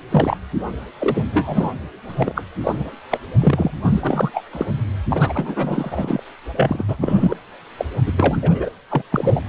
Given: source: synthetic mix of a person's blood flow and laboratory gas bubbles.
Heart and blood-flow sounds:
Doppler ultrasound of blood flow; precordium
0.10-0.37 s: bubbles
0.98-1.24 s: bubbles
1.32-1.73 s: bubbles
2.08-2.42 s: bubbles
2.62-2.91 s: bubbles
3.10-3.19 s: bubbles
3.41-3.71 s: bubbles
3.83-4.30 s: bubbles
4.33-4.42 s: bubbles
4.52-4.66 s: bubbles
5.09-6.23 s: bubbles
6.56-6.85 s: bubbles
6.88-6.96 s: bubbles
7.01-7.35 s: bubbles
7.78-7.85 s: bubbles
8.06-8.12 s: bubbles
8.16-8.70 s: bubbles
8.89-9.01 s: bubbles
9.12-9.40 s: bubbles
From the record:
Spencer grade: 3 (all of the cardiac periods contain showers or single bubble signals, but not dominating or overriding the cardiac motion signals); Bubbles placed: anywhere in the cardiac cycle

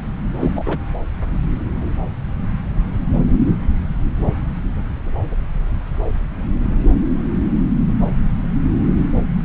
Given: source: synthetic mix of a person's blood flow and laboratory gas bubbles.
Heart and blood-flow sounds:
Doppler ultrasound of blood flow; subclavian vein
0.40-0.51 s: bubbles
0.55-0.79 s: bubbles
From the record:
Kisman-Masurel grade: 212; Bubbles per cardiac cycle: several, 3 to 8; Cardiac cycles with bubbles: 1 to 10%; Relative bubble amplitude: moderate (0.250 to 0.450); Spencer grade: 1 (occasional bubble signal discernible with the cardiac motion signal, with majority of cardiac periods free of bubbles); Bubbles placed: anywhere in the cardiac cycle

